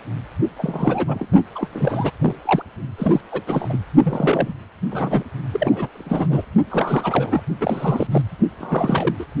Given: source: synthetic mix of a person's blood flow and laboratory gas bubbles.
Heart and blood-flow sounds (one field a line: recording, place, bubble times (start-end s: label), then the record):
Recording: Doppler ultrasound of blood flow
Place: precordium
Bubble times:
0.58-1.26 s: bubbles
1.55-1.68 s: bubbles
1.72-2.11 s: bubbles
2.20-2.35 s: bubbles
2.45-2.62 s: bubbles
2.98-3.21 s: bubbles
3.32-3.42 s: bubbles
3.47-3.78 s: bubbles
4.03-4.54 s: bubbles
4.91-5.24 s: bubbles
5.53-5.88 s: bubbles
5.94-6.45 s: bubbles
6.70-7.42 s: bubbles
7.61-8.07 s: bubbles
8.11-8.22 s: bubbles
8.59-9.15 s: bubbles
9.19-9.25 s: bubbles
From the record:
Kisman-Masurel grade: 332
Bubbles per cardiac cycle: rolling drumbeat, 9 or more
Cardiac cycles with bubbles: 50 to 99%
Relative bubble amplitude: moderate (0.250 to 0.450)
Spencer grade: 3 (all of the cardiac periods contain showers or single bubble signals, but not dominating or overriding the cardiac motion signals)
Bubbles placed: only in the low amplitude regions of the cardiac cycle